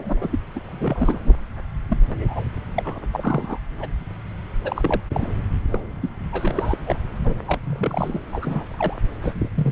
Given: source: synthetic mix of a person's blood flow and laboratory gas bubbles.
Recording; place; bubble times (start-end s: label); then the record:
Doppler ultrasound of blood flow; subclavian vein
0.00-0.39 s: bubbles
0.55-0.60 s: bubbles
0.67-1.19 s: bubbles
1.23-1.33 s: bubbles
1.89-1.97 s: bubbles
2.08-2.44 s: bubbles
2.75-2.99 s: bubbles
3.12-3.58 s: bubbles
3.80-3.88 s: bubbles
4.63-5.00 s: bubbles
5.12-5.34 s: bubbles
5.71-5.80 s: bubbles
6.02-6.09 s: bubbles
6.31-6.75 s: bubbles
6.84-6.96 s: bubbles
7.23-7.34 s: bubbles
7.47-7.59 s: bubbles
7.63-8.19 s: bubbles
8.32-9.00 s: bubbles
9.21-9.49 s: bubbles
9.54-9.72 s: bubbles
From the record:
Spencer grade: 3 (all of the cardiac periods contain showers or single bubble signals, but not dominating or overriding the cardiac motion signals); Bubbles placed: anywhere in the cardiac cycle